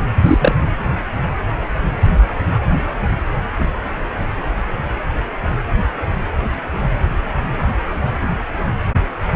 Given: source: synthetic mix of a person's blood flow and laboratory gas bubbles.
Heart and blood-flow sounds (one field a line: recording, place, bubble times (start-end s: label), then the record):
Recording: Doppler ultrasound of blood flow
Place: precordium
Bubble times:
0.26-0.55 s: bubbles
From the record:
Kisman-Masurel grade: 113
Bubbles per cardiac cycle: 1 to 2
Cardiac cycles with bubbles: 1 to 10%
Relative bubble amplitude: loud (0.450 to 0.775)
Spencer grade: 1 (occasional bubble signal discernible with the cardiac motion signal, with majority of cardiac periods free of bubbles)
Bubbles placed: anywhere in the cardiac cycle